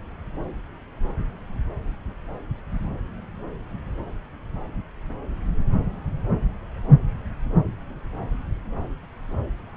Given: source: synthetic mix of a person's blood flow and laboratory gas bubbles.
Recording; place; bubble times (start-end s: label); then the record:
Doppler ultrasound of blood flow; subclavian vein
no bubbles
From the record:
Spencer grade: 0 (complete lack of bubble signals)